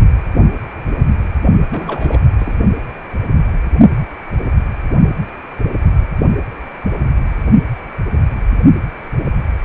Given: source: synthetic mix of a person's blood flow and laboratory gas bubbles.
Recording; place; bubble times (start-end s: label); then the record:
Doppler ultrasound of blood flow; precordium
1.72-2.21 s: bubbles
2.38-2.56 s: bubbles
From the record:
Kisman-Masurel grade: 212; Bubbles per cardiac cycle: several, 3 to 8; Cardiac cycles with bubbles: 1 to 10%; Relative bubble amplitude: moderate (0.250 to 0.450); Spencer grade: 1 (occasional bubble signal discernible with the cardiac motion signal, with majority of cardiac periods free of bubbles); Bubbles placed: only in the low amplitude regions of the cardiac cycle